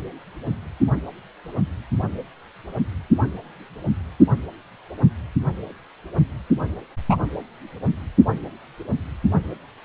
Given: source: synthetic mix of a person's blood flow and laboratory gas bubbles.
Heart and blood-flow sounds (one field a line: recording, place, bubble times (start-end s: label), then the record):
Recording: Doppler ultrasound of blood flow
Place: precordium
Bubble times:
7.09-7.17 s: bubbles
From the record:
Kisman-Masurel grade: 113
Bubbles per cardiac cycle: 1 to 2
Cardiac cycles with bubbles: 1 to 10%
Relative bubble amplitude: loud (0.450 to 0.775)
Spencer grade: 1 (occasional bubble signal discernible with the cardiac motion signal, with majority of cardiac periods free of bubbles)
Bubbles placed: only in the low amplitude regions of the cardiac cycle